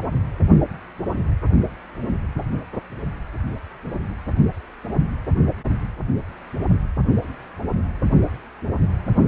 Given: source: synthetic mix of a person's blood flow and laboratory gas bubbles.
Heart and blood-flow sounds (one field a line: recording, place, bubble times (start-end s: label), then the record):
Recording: Doppler ultrasound of blood flow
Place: precordium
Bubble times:
8.60-8.72 s: bubbles
From the record:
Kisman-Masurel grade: 111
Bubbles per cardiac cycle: 1 to 2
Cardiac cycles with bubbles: 1 to 10%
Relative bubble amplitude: barely perceptible (0.100 to 0.250)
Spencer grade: 1 (occasional bubble signal discernible with the cardiac motion signal, with majority of cardiac periods free of bubbles)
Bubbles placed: only in the low amplitude regions of the cardiac cycle